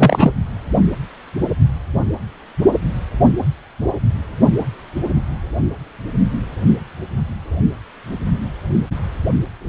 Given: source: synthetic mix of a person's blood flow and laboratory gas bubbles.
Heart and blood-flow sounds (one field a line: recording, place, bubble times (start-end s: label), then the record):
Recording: Doppler ultrasound of blood flow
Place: precordium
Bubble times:
0.00-0.32 s: bubbles
From the record:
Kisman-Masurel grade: 213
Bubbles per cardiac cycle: several, 3 to 8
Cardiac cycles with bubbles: 1 to 10%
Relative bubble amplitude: loud (0.450 to 0.775)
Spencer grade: 1 (occasional bubble signal discernible with the cardiac motion signal, with majority of cardiac periods free of bubbles)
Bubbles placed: only in the low amplitude regions of the cardiac cycle